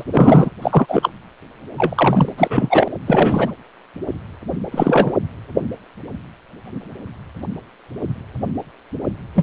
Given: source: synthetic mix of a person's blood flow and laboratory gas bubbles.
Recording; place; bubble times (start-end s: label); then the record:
Doppler ultrasound of blood flow; precordium
0.00-0.04 s: bubbles
0.12-0.50 s: bubbles
0.61-1.10 s: bubbles
1.77-2.29 s: bubbles
2.37-2.87 s: bubbles
3.06-3.52 s: bubbles
4.71-5.13 s: bubbles
9.35-9.43 s: bubbles
From the record:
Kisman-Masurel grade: 223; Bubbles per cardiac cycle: several, 3 to 8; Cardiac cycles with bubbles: 10 to 50%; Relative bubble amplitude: loud (0.450 to 0.775); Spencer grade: 2 (many but less than half of the cardiac periods contain bubble signals, singularly or in groups); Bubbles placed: anywhere in the cardiac cycle